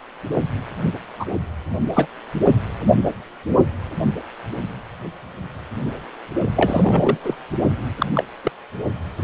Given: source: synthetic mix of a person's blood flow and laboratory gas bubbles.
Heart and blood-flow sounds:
Doppler ultrasound of blood flow; precordium
1.19-1.25 s: bubbles
1.93-2.07 s: bubbles
2.46-2.52 s: bubbles
6.56-7.17 s: bubbles
7.22-7.34 s: bubbles
7.99-8.07 s: bubbles
8.15-8.25 s: bubbles
8.43-8.52 s: bubbles
From the record:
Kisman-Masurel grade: 222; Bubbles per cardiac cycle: several, 3 to 8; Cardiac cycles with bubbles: 10 to 50%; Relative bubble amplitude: moderate (0.250 to 0.450); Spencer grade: 2 (many but less than half of the cardiac periods contain bubble signals, singularly or in groups); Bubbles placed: only in the low amplitude regions of the cardiac cycle

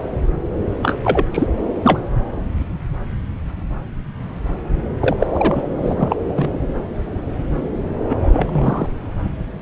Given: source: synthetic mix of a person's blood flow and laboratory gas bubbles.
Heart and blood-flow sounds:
Doppler ultrasound of blood flow; subclavian vein
0.82-0.98 s: bubbles
1.04-1.24 s: bubbles
1.32-1.47 s: bubbles
1.82-2.00 s: bubbles
5.00-5.17 s: bubbles
5.20-5.26 s: bubbles
5.34-5.66 s: bubbles
5.76-6.15 s: bubbles
6.35-6.49 s: bubbles
8.09-8.86 s: bubbles
From the record:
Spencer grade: 2 (many but less than half of the cardiac periods contain bubble signals, singularly or in groups); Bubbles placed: anywhere in the cardiac cycle

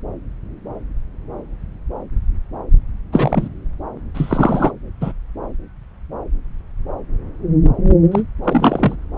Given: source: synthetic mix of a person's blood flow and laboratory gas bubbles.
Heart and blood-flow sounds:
Doppler ultrasound of blood flow; subclavian vein
3.12-3.48 s: bubbles
4.14-4.71 s: bubbles
5.00-5.12 s: bubbles
8.11-8.23 s: bubbles
8.43-8.96 s: bubbles
From the record:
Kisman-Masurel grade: 223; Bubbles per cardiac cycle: several, 3 to 8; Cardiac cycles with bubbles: 10 to 50%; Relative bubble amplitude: loud (0.450 to 0.775); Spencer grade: 2 (many but less than half of the cardiac periods contain bubble signals, singularly or in groups); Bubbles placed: anywhere in the cardiac cycle

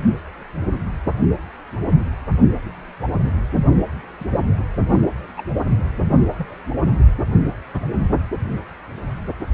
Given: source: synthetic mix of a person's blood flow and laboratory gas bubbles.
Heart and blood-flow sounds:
Doppler ultrasound of blood flow; precordium
4.19-4.25 s: bubbles
4.31-4.41 s: bubbles
4.92-5.01 s: bubbles
5.37-5.44 s: bubbles
6.38-6.47 s: bubbles
7.74-7.80 s: bubbles
7.99-8.07 s: bubbles
From the record:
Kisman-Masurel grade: 121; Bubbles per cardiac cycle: 1 to 2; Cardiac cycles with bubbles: 10 to 50%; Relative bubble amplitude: barely perceptible (0.100 to 0.250); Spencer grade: 2 (many but less than half of the cardiac periods contain bubble signals, singularly or in groups); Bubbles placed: anywhere in the cardiac cycle

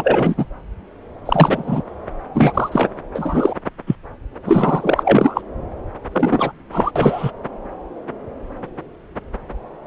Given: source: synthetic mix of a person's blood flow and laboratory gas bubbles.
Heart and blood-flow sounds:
Doppler ultrasound of blood flow; subclavian vein
0.00-0.45 s: bubbles
1.25-1.83 s: bubbles
2.35-2.88 s: bubbles
3.14-3.54 s: bubbles
3.87-3.96 s: bubbles
4.45-5.41 s: bubbles
6.12-6.52 s: bubbles
6.72-6.91 s: bubbles
6.96-7.32 s: bubbles
From the record:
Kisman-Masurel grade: 233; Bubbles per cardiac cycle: several, 3 to 8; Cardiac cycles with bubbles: 50 to 99%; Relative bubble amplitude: loud (0.450 to 0.775); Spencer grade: 3 (all of the cardiac periods contain showers or single bubble signals, but not dominating or overriding the cardiac motion signals); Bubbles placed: anywhere in the cardiac cycle

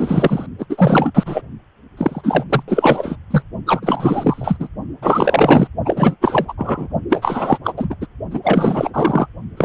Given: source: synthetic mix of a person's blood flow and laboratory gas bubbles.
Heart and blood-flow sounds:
Doppler ultrasound of blood flow; precordium
0.00-0.47 s: bubbles
0.58-0.66 s: bubbles
0.70-1.11 s: bubbles
1.15-1.42 s: bubbles
1.97-2.44 s: bubbles
2.49-2.63 s: bubbles
2.67-3.17 s: bubbles
3.30-3.42 s: bubbles
3.66-4.68 s: bubbles
5.02-5.68 s: bubbles
5.85-6.16 s: bubbles
6.21-6.53 s: bubbles
6.58-6.87 s: bubbles
7.09-7.58 s: bubbles
7.64-7.73 s: bubbles
7.77-7.96 s: bubbles
8.01-8.06 s: bubbles
8.30-8.41 s: bubbles
8.43-8.90 s: bubbles
8.94-9.27 s: bubbles
9.56-9.65 s: bubbles
From the record:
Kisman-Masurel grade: 444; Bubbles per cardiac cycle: continuous sound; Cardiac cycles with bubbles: 100%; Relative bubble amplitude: maximal (0.775 to 0.999); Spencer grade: 4 (maximum detectable bubble signal sounding continuously throughout systole and diastole of every cardiac period, and overriding the amplitude of the normal cardiac signals); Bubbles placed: only in the low amplitude regions of the cardiac cycle

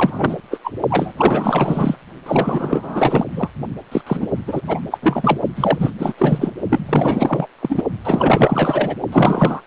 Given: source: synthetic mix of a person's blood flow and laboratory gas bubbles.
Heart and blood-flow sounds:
Doppler ultrasound of blood flow; precordium
0.00-0.41 s: bubbles
0.50-0.59 s: bubbles
0.64-0.71 s: bubbles
0.90-1.12 s: bubbles
1.16-1.97 s: bubbles
2.26-3.27 s: bubbles
3.31-3.50 s: bubbles
3.91-4.02 s: bubbles
4.07-4.27 s: bubbles
4.47-4.62 s: bubbles
4.67-4.81 s: bubbles
4.91-4.98 s: bubbles
5.02-5.39 s: bubbles
5.56-5.91 s: bubbles
5.99-6.14 s: bubbles
6.18-6.52 s: bubbles
6.69-7.47 s: bubbles
7.62-7.83 s: bubbles
8.04-8.96 s: bubbles
9.12-9.61 s: bubbles
From the record:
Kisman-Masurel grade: 444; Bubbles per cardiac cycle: continuous sound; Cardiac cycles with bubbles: 100%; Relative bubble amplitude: maximal (0.775 to 0.999); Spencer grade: 4 (maximum detectable bubble signal sounding continuously throughout systole and diastole of every cardiac period, and overriding the amplitude of the normal cardiac signals); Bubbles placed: only in the low amplitude regions of the cardiac cycle

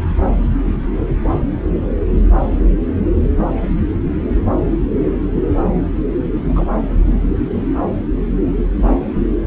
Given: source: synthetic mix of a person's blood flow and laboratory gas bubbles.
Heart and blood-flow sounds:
Doppler ultrasound of blood flow; subclavian vein
6.44-6.65 s: bubbles
From the record:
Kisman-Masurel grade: 112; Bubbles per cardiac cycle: 1 to 2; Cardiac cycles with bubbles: 1 to 10%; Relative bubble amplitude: moderate (0.250 to 0.450); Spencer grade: 1 (occasional bubble signal discernible with the cardiac motion signal, with majority of cardiac periods free of bubbles); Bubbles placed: anywhere in the cardiac cycle

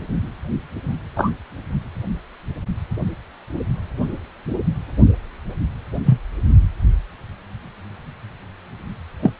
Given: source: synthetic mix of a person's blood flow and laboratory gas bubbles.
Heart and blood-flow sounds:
Doppler ultrasound of blood flow; precordium
1.16-1.32 s: bubbles
6.05-6.21 s: bubbles
9.23-9.32 s: bubbles
From the record:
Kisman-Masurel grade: 123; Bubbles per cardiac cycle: 1 to 2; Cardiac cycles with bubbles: 10 to 50%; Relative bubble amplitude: loud (0.450 to 0.775); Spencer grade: 2 (many but less than half of the cardiac periods contain bubble signals, singularly or in groups); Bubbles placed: only in the low amplitude regions of the cardiac cycle

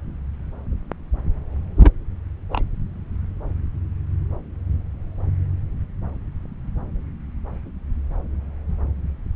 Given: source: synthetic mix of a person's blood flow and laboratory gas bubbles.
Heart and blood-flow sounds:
Doppler ultrasound of blood flow; subclavian vein
1.76-1.91 s: bubbles
2.50-2.64 s: bubbles
From the record:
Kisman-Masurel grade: 112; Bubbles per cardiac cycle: 1 to 2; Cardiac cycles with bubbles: 1 to 10%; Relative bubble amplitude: moderate (0.250 to 0.450); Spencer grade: 1 (occasional bubble signal discernible with the cardiac motion signal, with majority of cardiac periods free of bubbles); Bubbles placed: anywhere in the cardiac cycle

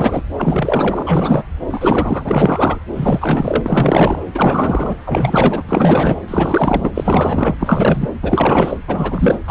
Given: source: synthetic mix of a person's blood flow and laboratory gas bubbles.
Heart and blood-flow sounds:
Doppler ultrasound of blood flow; subclavian vein
0.00-0.23 s: bubbles
0.37-1.43 s: bubbles
1.69-2.79 s: bubbles
2.94-4.19 s: bubbles
4.34-4.95 s: bubbles
5.05-5.63 s: bubbles
5.69-6.21 s: bubbles
6.28-6.91 s: bubbles
6.95-7.55 s: bubbles
7.59-8.10 s: bubbles
8.22-8.77 s: bubbles
8.87-9.39 s: bubbles
9.46-9.51 s: bubbles
From the record:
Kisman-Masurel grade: 444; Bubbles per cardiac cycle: continuous sound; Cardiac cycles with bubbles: 100%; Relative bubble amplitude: maximal (0.775 to 0.999); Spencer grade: 4 (maximum detectable bubble signal sounding continuously throughout systole and diastole of every cardiac period, and overriding the amplitude of the normal cardiac signals); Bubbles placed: anywhere in the cardiac cycle

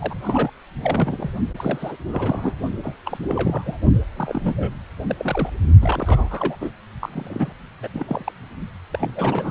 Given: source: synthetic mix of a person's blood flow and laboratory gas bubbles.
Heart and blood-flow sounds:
Doppler ultrasound of blood flow; precordium
0.00-0.14 s: bubbles
0.22-0.49 s: bubbles
0.79-1.31 s: bubbles
1.57-1.96 s: bubbles
2.07-2.54 s: bubbles
2.83-2.96 s: bubbles
3.05-3.19 s: bubbles
3.25-3.78 s: bubbles
4.17-4.74 s: bubbles
5.08-5.16 s: bubbles
5.18-5.50 s: bubbles
5.81-6.56 s: bubbles
6.60-6.71 s: bubbles
7.01-7.09 s: bubbles
7.13-7.53 s: bubbles
7.82-7.88 s: bubbles
7.94-8.31 s: bubbles
8.93-9.51 s: bubbles
From the record:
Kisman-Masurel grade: 342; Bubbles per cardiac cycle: rolling drumbeat, 9 or more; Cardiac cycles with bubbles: 100%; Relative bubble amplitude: moderate (0.250 to 0.450); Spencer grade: 3 (all of the cardiac periods contain showers or single bubble signals, but not dominating or overriding the cardiac motion signals); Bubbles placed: only in the low amplitude regions of the cardiac cycle

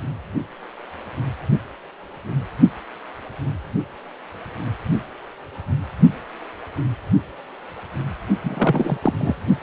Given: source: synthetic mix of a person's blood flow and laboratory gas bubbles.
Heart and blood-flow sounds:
Doppler ultrasound of blood flow; precordium
8.43-8.97 s: bubbles
9.02-9.13 s: bubbles
9.20-9.34 s: bubbles
From the record:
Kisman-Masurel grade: 212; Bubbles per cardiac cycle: several, 3 to 8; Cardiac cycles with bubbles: 1 to 10%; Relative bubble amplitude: moderate (0.250 to 0.450); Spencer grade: 1 (occasional bubble signal discernible with the cardiac motion signal, with majority of cardiac periods free of bubbles); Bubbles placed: only in the low amplitude regions of the cardiac cycle

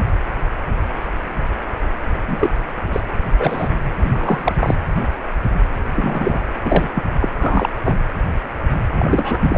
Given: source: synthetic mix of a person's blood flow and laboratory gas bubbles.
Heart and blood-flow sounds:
Doppler ultrasound of blood flow; precordium
2.23-2.50 s: bubbles
2.92-3.00 s: bubbles
3.39-3.75 s: bubbles
4.04-4.54 s: bubbles
4.58-4.75 s: bubbles
5.95-6.40 s: bubbles
6.64-6.89 s: bubbles
6.95-7.03 s: bubbles
7.21-7.28 s: bubbles
7.39-7.70 s: bubbles
7.84-7.97 s: bubbles
8.98-9.38 s: bubbles
9.41-9.58 s: bubbles
From the record:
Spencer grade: 3 (all of the cardiac periods contain showers or single bubble signals, but not dominating or overriding the cardiac motion signals); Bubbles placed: anywhere in the cardiac cycle

